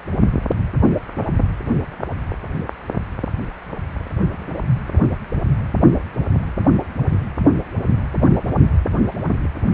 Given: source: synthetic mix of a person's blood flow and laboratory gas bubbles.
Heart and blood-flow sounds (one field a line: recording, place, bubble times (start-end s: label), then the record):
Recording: Doppler ultrasound of blood flow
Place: precordium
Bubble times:
4.32-4.48 s: bubbles
9.23-9.28 s: bubbles
From the record:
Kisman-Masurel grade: 121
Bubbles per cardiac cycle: 1 to 2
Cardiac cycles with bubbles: 10 to 50%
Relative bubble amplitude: barely perceptible (0.100 to 0.250)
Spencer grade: 2 (many but less than half of the cardiac periods contain bubble signals, singularly or in groups)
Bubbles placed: only in the low amplitude regions of the cardiac cycle